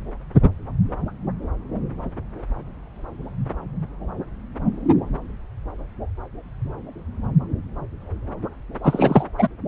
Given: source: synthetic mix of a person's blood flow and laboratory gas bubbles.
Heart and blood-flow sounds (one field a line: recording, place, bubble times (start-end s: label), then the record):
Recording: Doppler ultrasound of blood flow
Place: subclavian vein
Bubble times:
8.83-9.27 s: bubbles
9.38-9.47 s: bubbles
From the record:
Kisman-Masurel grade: 223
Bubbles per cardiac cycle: several, 3 to 8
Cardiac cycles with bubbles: 10 to 50%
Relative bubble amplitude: loud (0.450 to 0.775)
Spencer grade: 2 (many but less than half of the cardiac periods contain bubble signals, singularly or in groups)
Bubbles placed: anywhere in the cardiac cycle